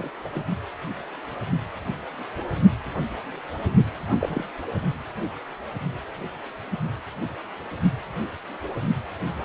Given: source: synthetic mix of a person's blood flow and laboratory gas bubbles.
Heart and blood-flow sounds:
Doppler ultrasound of blood flow; precordium
0.00-0.10 s: bubbles
0.24-0.29 s: bubbles
0.33-0.43 s: bubbles
4.09-4.17 s: bubbles
4.21-4.44 s: bubbles
From the record:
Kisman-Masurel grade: 221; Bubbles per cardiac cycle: several, 3 to 8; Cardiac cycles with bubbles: 10 to 50%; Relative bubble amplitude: barely perceptible (0.100 to 0.250); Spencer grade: 2 (many but less than half of the cardiac periods contain bubble signals, singularly or in groups); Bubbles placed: only in the low amplitude regions of the cardiac cycle

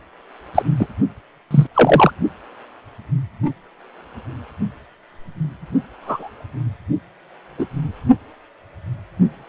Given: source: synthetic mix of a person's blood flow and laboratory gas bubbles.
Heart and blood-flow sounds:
Doppler ultrasound of blood flow; precordium
0.55-0.62 s: bubbles
0.79-0.87 s: bubbles
1.50-1.67 s: bubbles
1.74-2.11 s: bubbles
6.02-6.29 s: bubbles
7.58-7.66 s: bubbles
From the record:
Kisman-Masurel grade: 123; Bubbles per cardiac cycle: 1 to 2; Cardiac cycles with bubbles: 10 to 50%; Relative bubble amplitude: loud (0.450 to 0.775); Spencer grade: 2 (many but less than half of the cardiac periods contain bubble signals, singularly or in groups); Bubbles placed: only in the low amplitude regions of the cardiac cycle

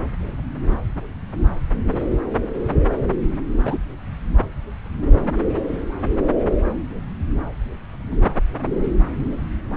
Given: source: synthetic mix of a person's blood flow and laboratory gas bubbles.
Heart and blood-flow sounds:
Doppler ultrasound of blood flow; subclavian vein
3.65-3.78 s: bubbles
From the record:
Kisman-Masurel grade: 113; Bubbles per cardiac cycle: 1 to 2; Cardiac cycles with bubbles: 1 to 10%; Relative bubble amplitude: loud (0.450 to 0.775); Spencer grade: 1 (occasional bubble signal discernible with the cardiac motion signal, with majority of cardiac periods free of bubbles); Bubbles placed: anywhere in the cardiac cycle

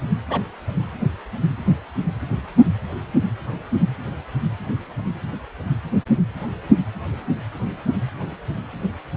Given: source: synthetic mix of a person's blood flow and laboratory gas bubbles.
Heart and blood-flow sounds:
Doppler ultrasound of blood flow; precordium
0.29-0.41 s: bubbles
From the record:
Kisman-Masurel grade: 112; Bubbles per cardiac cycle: 1 to 2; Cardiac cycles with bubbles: 1 to 10%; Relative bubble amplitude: moderate (0.250 to 0.450); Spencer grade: 1 (occasional bubble signal discernible with the cardiac motion signal, with majority of cardiac periods free of bubbles); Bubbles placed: anywhere in the cardiac cycle

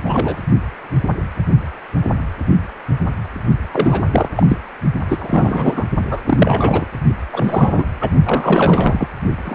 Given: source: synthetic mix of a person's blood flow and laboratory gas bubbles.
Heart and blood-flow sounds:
Doppler ultrasound of blood flow; precordium
0.04-0.37 s: bubbles
3.71-4.04 s: bubbles
4.10-4.29 s: bubbles
4.37-4.57 s: bubbles
5.08-5.84 s: bubbles
6.09-6.20 s: bubbles
6.26-6.85 s: bubbles
7.33-7.85 s: bubbles
8.01-8.11 s: bubbles
8.26-9.08 s: bubbles
9.45-9.55 s: bubbles
From the record:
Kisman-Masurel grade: 333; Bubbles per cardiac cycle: rolling drumbeat, 9 or more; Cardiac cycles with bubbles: 50 to 99%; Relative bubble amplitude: loud (0.450 to 0.775); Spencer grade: 3 (all of the cardiac periods contain showers or single bubble signals, but not dominating or overriding the cardiac motion signals); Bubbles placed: only in the low amplitude regions of the cardiac cycle

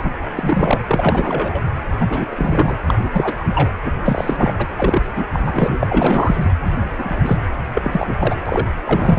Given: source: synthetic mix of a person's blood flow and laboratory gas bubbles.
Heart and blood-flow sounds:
Doppler ultrasound of blood flow; precordium
0.00-0.11 s: bubbles
0.35-0.80 s: bubbles
0.89-1.62 s: bubbles
2.00-2.06 s: bubbles
2.10-2.26 s: bubbles
2.31-2.77 s: bubbles
2.88-2.94 s: bubbles
3.02-3.33 s: bubbles
3.37-3.44 s: bubbles
3.55-3.69 s: bubbles
3.85-3.91 s: bubbles
4.05-4.55 s: bubbles
4.57-4.68 s: bubbles
4.78-5.26 s: bubbles
5.32-5.39 s: bubbles
5.46-5.78 s: bubbles
5.80-6.51 s: bubbles
6.98-7.38 s: bubbles
7.74-8.15 s: bubbles
8.19-8.36 s: bubbles
8.46-8.66 s: bubbles
8.84-9.19 s: bubbles
From the record:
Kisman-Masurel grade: 333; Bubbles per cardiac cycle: rolling drumbeat, 9 or more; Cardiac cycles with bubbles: 50 to 99%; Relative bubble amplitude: loud (0.450 to 0.775); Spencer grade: 3 (all of the cardiac periods contain showers or single bubble signals, but not dominating or overriding the cardiac motion signals); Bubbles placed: anywhere in the cardiac cycle

